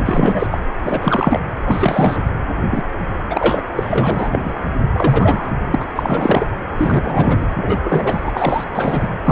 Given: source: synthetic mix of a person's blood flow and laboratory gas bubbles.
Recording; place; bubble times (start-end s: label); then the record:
Doppler ultrasound of blood flow; precordium
0.05-0.47 s: bubbles
0.51-0.59 s: bubbles
0.83-1.40 s: bubbles
1.64-2.31 s: bubbles
2.71-2.82 s: bubbles
3.30-3.64 s: bubbles
3.76-4.54 s: bubbles
4.93-5.52 s: bubbles
5.71-5.85 s: bubbles
5.95-6.47 s: bubbles
6.77-7.46 s: bubbles
7.56-7.78 s: bubbles
7.84-8.64 s: bubbles
8.75-9.07 s: bubbles
9.24-9.31 s: bubbles
From the record:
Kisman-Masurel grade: 343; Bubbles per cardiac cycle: rolling drumbeat, 9 or more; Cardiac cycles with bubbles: 100%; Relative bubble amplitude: loud (0.450 to 0.775); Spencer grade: 3 (all of the cardiac periods contain showers or single bubble signals, but not dominating or overriding the cardiac motion signals); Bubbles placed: anywhere in the cardiac cycle